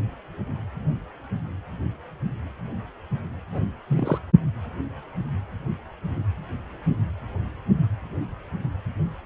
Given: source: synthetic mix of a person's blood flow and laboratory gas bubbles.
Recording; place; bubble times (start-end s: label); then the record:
Doppler ultrasound of blood flow; precordium
3.52-3.63 s: bubbles
3.90-4.19 s: bubbles
From the record:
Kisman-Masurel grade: 211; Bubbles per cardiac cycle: several, 3 to 8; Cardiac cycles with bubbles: 1 to 10%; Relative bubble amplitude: barely perceptible (0.100 to 0.250); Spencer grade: 1 (occasional bubble signal discernible with the cardiac motion signal, with majority of cardiac periods free of bubbles); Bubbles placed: anywhere in the cardiac cycle